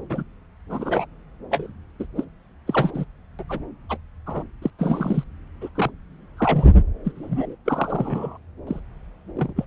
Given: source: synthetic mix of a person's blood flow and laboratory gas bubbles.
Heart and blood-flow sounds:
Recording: Doppler ultrasound of blood flow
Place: subclavian vein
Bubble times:
0.10-0.24 s: bubbles
0.69-1.06 s: bubbles
1.50-1.72 s: bubbles
2.00-2.06 s: bubbles
2.17-2.25 s: bubbles
2.67-2.91 s: bubbles
2.94-3.05 s: bubbles
3.38-3.43 s: bubbles
3.49-3.60 s: bubbles
3.89-3.98 s: bubbles
4.26-4.43 s: bubbles
4.62-4.70 s: bubbles
4.79-5.24 s: bubbles
5.61-5.69 s: bubbles
5.75-5.91 s: bubbles
6.37-6.78 s: bubbles
7.05-7.12 s: bubbles
7.16-7.56 s: bubbles
7.66-8.38 s: bubbles
8.67-8.80 s: bubbles
9.35-9.54 s: bubbles
9.56-9.65 s: bubbles
From the record:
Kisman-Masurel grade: 242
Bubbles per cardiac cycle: several, 3 to 8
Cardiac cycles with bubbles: 100%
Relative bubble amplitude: moderate (0.250 to 0.450)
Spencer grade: 3 (all of the cardiac periods contain showers or single bubble signals, but not dominating or overriding the cardiac motion signals)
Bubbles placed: anywhere in the cardiac cycle

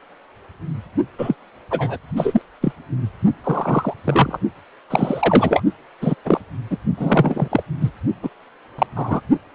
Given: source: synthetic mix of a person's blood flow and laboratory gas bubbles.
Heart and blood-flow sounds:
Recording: Doppler ultrasound of blood flow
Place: precordium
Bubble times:
1.18-1.35 s: bubbles
1.70-1.97 s: bubbles
2.15-2.42 s: bubbles
2.61-2.72 s: bubbles
3.43-3.93 s: bubbles
4.04-4.39 s: bubbles
4.90-5.62 s: bubbles
6.01-6.14 s: bubbles
6.25-6.41 s: bubbles
6.70-6.77 s: bubbles
6.97-7.63 s: bubbles
7.81-7.91 s: bubbles
8.23-8.29 s: bubbles
8.78-8.87 s: bubbles
8.96-9.21 s: bubbles
From the record:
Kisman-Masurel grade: 233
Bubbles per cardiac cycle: several, 3 to 8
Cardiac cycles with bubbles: 50 to 99%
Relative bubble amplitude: loud (0.450 to 0.775)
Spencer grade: 3 (all of the cardiac periods contain showers or single bubble signals, but not dominating or overriding the cardiac motion signals)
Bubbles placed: only in the low amplitude regions of the cardiac cycle

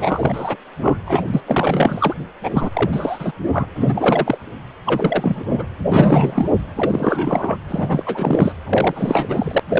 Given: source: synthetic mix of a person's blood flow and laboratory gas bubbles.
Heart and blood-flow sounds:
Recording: Doppler ultrasound of blood flow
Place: precordium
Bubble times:
0.00-0.57 s: bubbles
0.82-0.99 s: bubbles
1.05-1.22 s: bubbles
1.33-1.41 s: bubbles
1.46-2.14 s: bubbles
2.43-2.69 s: bubbles
2.73-3.32 s: bubbles
3.51-3.66 s: bubbles
3.75-4.38 s: bubbles
4.85-5.69 s: bubbles
5.92-6.49 s: bubbles
6.75-7.57 s: bubbles
7.68-8.52 s: bubbles
8.67-9.60 s: bubbles
9.69-9.79 s: bubbles
From the record:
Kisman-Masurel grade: 343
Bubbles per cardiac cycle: rolling drumbeat, 9 or more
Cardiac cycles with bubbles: 100%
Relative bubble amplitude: loud (0.450 to 0.775)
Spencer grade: 3 (all of the cardiac periods contain showers or single bubble signals, but not dominating or overriding the cardiac motion signals)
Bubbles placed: anywhere in the cardiac cycle

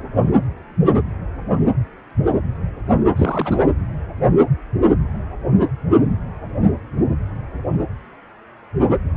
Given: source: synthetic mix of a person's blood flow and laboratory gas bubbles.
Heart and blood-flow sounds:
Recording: Doppler ultrasound of blood flow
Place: precordium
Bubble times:
3.16-3.65 s: bubbles
From the record:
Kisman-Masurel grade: 212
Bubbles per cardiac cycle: several, 3 to 8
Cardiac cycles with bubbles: 1 to 10%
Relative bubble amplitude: moderate (0.250 to 0.450)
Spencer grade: 1 (occasional bubble signal discernible with the cardiac motion signal, with majority of cardiac periods free of bubbles)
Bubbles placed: anywhere in the cardiac cycle

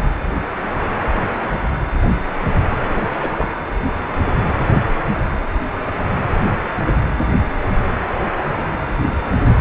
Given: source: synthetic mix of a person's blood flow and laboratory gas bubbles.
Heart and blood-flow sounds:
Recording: Doppler ultrasound of blood flow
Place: precordium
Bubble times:
3.21-3.47 s: bubbles
From the record:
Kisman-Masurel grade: 112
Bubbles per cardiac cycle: 1 to 2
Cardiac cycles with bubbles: 1 to 10%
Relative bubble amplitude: moderate (0.250 to 0.450)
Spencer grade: 1 (occasional bubble signal discernible with the cardiac motion signal, with majority of cardiac periods free of bubbles)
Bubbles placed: anywhere in the cardiac cycle

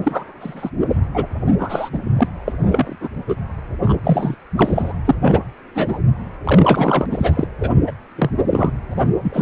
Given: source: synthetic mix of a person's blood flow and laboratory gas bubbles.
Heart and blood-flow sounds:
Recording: Doppler ultrasound of blood flow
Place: precordium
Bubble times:
0.03-0.24 s: bubbles
0.40-0.70 s: bubbles
1.14-1.26 s: bubbles
1.58-1.90 s: bubbles
1.92-2.00 s: bubbles
2.17-2.29 s: bubbles
2.48-2.52 s: bubbles
2.62-2.96 s: bubbles
3.00-3.09 s: bubbles
3.28-3.35 s: bubbles
3.85-3.96 s: bubbles
4.04-4.35 s: bubbles
4.56-4.93 s: bubbles
5.04-5.15 s: bubbles
5.21-5.39 s: bubbles
5.75-6.00 s: bubbles
6.44-7.06 s: bubbles
7.10-7.46 s: bubbles
7.59-7.71 s: bubbles
7.87-7.92 s: bubbles
8.15-8.30 s: bubbles
8.51-8.73 s: bubbles
8.90-9.15 s: bubbles
9.22-9.42 s: bubbles
From the record:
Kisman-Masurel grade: 243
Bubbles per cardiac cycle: several, 3 to 8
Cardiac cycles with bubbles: 100%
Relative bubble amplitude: loud (0.450 to 0.775)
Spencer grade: 3 (all of the cardiac periods contain showers or single bubble signals, but not dominating or overriding the cardiac motion signals)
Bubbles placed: anywhere in the cardiac cycle

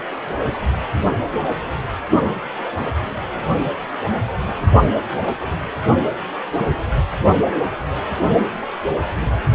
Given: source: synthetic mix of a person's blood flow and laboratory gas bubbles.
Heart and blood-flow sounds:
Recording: Doppler ultrasound of blood flow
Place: precordium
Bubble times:
4.46-4.55 s: bubbles
From the record:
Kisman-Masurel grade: 122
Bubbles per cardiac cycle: 1 to 2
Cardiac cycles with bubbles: 10 to 50%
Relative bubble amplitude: moderate (0.250 to 0.450)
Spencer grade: 2 (many but less than half of the cardiac periods contain bubble signals, singularly or in groups)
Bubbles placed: only in the low amplitude regions of the cardiac cycle

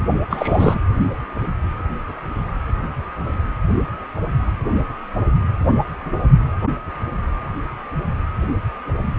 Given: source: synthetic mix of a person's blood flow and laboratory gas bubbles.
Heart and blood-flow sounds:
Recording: Doppler ultrasound of blood flow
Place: precordium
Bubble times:
0.29-0.78 s: bubbles
From the record:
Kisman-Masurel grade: 222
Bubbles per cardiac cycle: several, 3 to 8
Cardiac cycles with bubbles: 10 to 50%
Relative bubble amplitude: moderate (0.250 to 0.450)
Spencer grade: 2 (many but less than half of the cardiac periods contain bubble signals, singularly or in groups)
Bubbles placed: anywhere in the cardiac cycle

